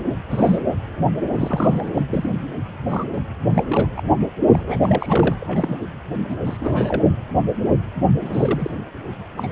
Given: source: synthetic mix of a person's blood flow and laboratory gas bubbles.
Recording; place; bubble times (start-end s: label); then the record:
Doppler ultrasound of blood flow; precordium
0.30-0.58 s: bubbles
1.32-1.90 s: bubbles
1.94-2.06 s: bubbles
2.10-2.31 s: bubbles
2.89-3.05 s: bubbles
3.12-3.21 s: bubbles
3.54-3.63 s: bubbles
3.67-3.88 s: bubbles
3.97-4.01 s: bubbles
4.50-4.79 s: bubbles
4.82-5.34 s: bubbles
5.41-5.88 s: bubbles
6.29-6.37 s: bubbles
6.45-6.57 s: bubbles
6.60-7.02 s: bubbles
8.21-8.74 s: bubbles
9.37-9.47 s: bubbles
From the record:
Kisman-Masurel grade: 232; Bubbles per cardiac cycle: several, 3 to 8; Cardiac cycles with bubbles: 50 to 99%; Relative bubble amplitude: moderate (0.250 to 0.450); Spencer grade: 3 (all of the cardiac periods contain showers or single bubble signals, but not dominating or overriding the cardiac motion signals); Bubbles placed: anywhere in the cardiac cycle